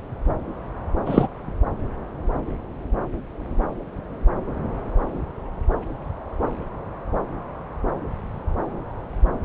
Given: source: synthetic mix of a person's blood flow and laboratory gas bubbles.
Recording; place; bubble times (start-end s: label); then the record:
Doppler ultrasound of blood flow; subclavian vein
1.05-1.27 s: bubbles
From the record:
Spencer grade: 1 (occasional bubble signal discernible with the cardiac motion signal, with majority of cardiac periods free of bubbles); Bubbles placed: anywhere in the cardiac cycle